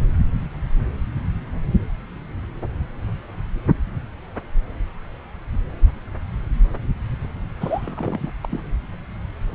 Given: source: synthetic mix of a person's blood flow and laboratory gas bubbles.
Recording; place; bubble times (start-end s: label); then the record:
Doppler ultrasound of blood flow; subclavian vein
7.60-8.31 s: bubbles
8.43-8.47 s: bubbles
8.51-8.60 s: bubbles
From the record:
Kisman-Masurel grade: 221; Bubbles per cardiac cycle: several, 3 to 8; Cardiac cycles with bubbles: 10 to 50%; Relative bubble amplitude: barely perceptible (0.100 to 0.250); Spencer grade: 2 (many but less than half of the cardiac periods contain bubble signals, singularly or in groups); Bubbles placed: anywhere in the cardiac cycle